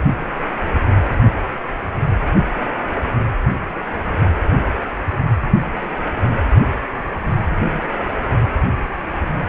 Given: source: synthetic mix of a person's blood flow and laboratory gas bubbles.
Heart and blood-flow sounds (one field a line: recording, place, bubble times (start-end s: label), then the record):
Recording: Doppler ultrasound of blood flow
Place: precordium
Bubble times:
no bubbles
From the record:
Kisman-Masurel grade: 000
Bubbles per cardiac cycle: 0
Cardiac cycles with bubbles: 0%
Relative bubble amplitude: no bubbles discernible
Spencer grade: 0 (complete lack of bubble signals)